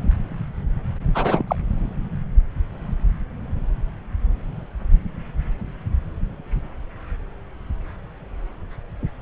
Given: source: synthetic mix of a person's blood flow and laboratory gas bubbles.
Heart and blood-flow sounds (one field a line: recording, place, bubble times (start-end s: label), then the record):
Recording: Doppler ultrasound of blood flow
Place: subclavian vein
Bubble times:
1.14-1.56 s: bubbles
From the record:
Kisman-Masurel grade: 212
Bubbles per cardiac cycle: several, 3 to 8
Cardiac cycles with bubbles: 1 to 10%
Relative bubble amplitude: moderate (0.250 to 0.450)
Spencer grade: 1 (occasional bubble signal discernible with the cardiac motion signal, with majority of cardiac periods free of bubbles)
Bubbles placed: anywhere in the cardiac cycle